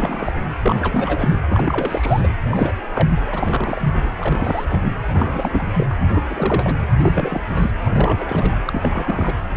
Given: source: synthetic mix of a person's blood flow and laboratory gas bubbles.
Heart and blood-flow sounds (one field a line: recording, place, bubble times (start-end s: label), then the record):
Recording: Doppler ultrasound of blood flow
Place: precordium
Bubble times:
0.00-0.33 s: bubbles
0.62-1.39 s: bubbles
1.50-2.29 s: bubbles
2.50-2.75 s: bubbles
2.94-3.08 s: bubbles
3.32-4.11 s: bubbles
4.17-4.66 s: bubbles
4.69-4.88 s: bubbles
5.12-5.93 s: bubbles
6.13-6.75 s: bubbles
6.97-7.42 s: bubbles
7.54-7.71 s: bubbles
7.83-8.56 s: bubbles
8.65-9.34 s: bubbles
9.51-9.57 s: bubbles
From the record:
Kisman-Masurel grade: 342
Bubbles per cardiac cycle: rolling drumbeat, 9 or more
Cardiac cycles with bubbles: 100%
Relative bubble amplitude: moderate (0.250 to 0.450)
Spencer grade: 3 (all of the cardiac periods contain showers or single bubble signals, but not dominating or overriding the cardiac motion signals)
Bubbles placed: anywhere in the cardiac cycle